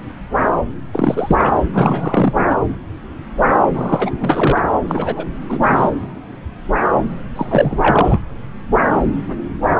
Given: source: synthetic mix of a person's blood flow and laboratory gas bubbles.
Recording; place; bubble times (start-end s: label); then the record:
Doppler ultrasound of blood flow; subclavian vein
0.92-1.55 s: bubbles
1.73-2.33 s: bubbles
2.37-2.61 s: bubbles
3.75-4.11 s: bubbles
4.20-4.61 s: bubbles
4.88-5.26 s: bubbles
5.49-5.91 s: bubbles
7.36-8.21 s: bubbles
From the record:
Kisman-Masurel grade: 333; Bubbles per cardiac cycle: rolling drumbeat, 9 or more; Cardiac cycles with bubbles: 50 to 99%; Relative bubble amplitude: loud (0.450 to 0.775); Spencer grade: 3 (all of the cardiac periods contain showers or single bubble signals, but not dominating or overriding the cardiac motion signals); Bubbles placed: anywhere in the cardiac cycle